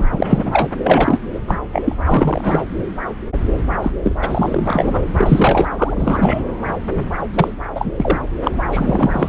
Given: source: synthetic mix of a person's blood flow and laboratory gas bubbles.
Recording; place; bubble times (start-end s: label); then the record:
Doppler ultrasound of blood flow; subclavian vein
0.00-0.05 s: bubbles
0.11-0.68 s: bubbles
0.83-1.22 s: bubbles
1.34-1.39 s: bubbles
1.47-1.58 s: bubbles
1.72-1.96 s: bubbles
2.04-2.66 s: bubbles
3.81-3.92 s: bubbles
4.03-4.15 s: bubbles
4.19-5.69 s: bubbles
5.78-6.43 s: bubbles
7.34-7.53 s: bubbles
7.75-7.92 s: bubbles
7.96-8.19 s: bubbles
8.43-8.51 s: bubbles
8.71-9.29 s: bubbles
From the record:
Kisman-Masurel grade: 333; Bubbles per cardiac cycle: rolling drumbeat, 9 or more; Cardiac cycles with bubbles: 50 to 99%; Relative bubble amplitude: loud (0.450 to 0.775); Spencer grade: 3 (all of the cardiac periods contain showers or single bubble signals, but not dominating or overriding the cardiac motion signals); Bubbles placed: anywhere in the cardiac cycle